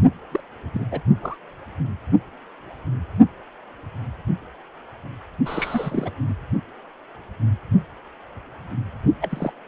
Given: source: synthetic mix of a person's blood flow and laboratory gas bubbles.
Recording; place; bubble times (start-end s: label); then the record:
Doppler ultrasound of blood flow; precordium
0.31-0.41 s: bubbles
0.73-0.86 s: bubbles
0.91-1.00 s: bubbles
1.22-1.37 s: bubbles
5.46-6.13 s: bubbles
6.28-6.33 s: bubbles
9.21-9.51 s: bubbles
From the record:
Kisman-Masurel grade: 221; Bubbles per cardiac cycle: several, 3 to 8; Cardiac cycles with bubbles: 10 to 50%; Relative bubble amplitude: barely perceptible (0.100 to 0.250); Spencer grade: 2 (many but less than half of the cardiac periods contain bubble signals, singularly or in groups); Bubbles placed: only in the low amplitude regions of the cardiac cycle